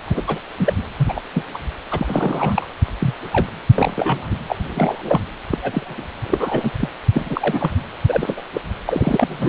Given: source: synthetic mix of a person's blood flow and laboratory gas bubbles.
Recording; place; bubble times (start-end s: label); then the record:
Doppler ultrasound of blood flow; precordium
0.05-0.22 s: bubbles
0.27-0.39 s: bubbles
0.58-0.73 s: bubbles
0.97-1.22 s: bubbles
1.33-1.43 s: bubbles
1.53-1.57 s: bubbles
1.91-2.67 s: bubbles
3.00-3.14 s: bubbles
3.32-3.47 s: bubbles
3.75-4.28 s: bubbles
4.46-4.56 s: bubbles
4.75-5.20 s: bubbles
5.51-5.58 s: bubbles
5.62-6.04 s: bubbles
6.30-6.71 s: bubbles
6.79-6.89 s: bubbles
7.12-7.71 s: bubbles
8.07-8.42 s: bubbles
8.54-8.61 s: bubbles
8.87-9.49 s: bubbles
From the record:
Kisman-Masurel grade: 242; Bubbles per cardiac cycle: several, 3 to 8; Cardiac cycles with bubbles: 100%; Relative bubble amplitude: moderate (0.250 to 0.450); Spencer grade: 3 (all of the cardiac periods contain showers or single bubble signals, but not dominating or overriding the cardiac motion signals); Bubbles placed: anywhere in the cardiac cycle